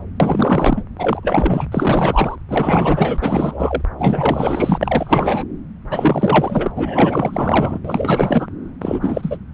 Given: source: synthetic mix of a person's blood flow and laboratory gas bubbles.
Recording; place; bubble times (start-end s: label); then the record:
Doppler ultrasound of blood flow; subclavian vein
0.20-0.83 s: bubbles
0.97-1.67 s: bubbles
1.72-2.36 s: bubbles
2.49-3.18 s: bubbles
3.21-3.82 s: bubbles
3.98-5.44 s: bubbles
5.90-6.71 s: bubbles
6.75-7.79 s: bubbles
7.84-8.47 s: bubbles
8.81-9.37 s: bubbles
From the record:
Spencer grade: 4 (maximum detectable bubble signal sounding continuously throughout systole and diastole of every cardiac period, and overriding the amplitude of the normal cardiac signals); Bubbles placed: anywhere in the cardiac cycle